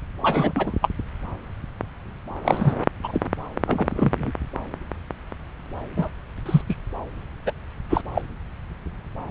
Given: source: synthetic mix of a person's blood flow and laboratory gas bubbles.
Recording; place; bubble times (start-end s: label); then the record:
Doppler ultrasound of blood flow; subclavian vein
0.22-0.52 s: bubbles
0.55-0.74 s: bubbles
0.81-0.89 s: bubbles
2.44-2.74 s: bubbles
3.04-3.21 s: bubbles
3.67-4.32 s: bubbles
5.96-6.09 s: bubbles
6.46-6.62 s: bubbles
6.69-6.75 s: bubbles
7.46-7.52 s: bubbles
7.89-8.02 s: bubbles
8.14-8.21 s: bubbles
From the record:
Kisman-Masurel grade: 232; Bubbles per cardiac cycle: several, 3 to 8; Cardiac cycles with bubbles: 50 to 99%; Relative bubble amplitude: moderate (0.250 to 0.450); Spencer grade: 3 (all of the cardiac periods contain showers or single bubble signals, but not dominating or overriding the cardiac motion signals); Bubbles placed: anywhere in the cardiac cycle